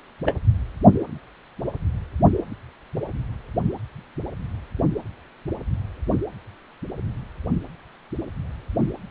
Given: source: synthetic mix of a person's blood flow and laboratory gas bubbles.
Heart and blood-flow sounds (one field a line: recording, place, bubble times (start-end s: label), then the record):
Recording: Doppler ultrasound of blood flow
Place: precordium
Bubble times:
0.26-0.33 s: bubbles
From the record:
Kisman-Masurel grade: 122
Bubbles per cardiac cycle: 1 to 2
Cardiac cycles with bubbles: 10 to 50%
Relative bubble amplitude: moderate (0.250 to 0.450)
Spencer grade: 2 (many but less than half of the cardiac periods contain bubble signals, singularly or in groups)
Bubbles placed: anywhere in the cardiac cycle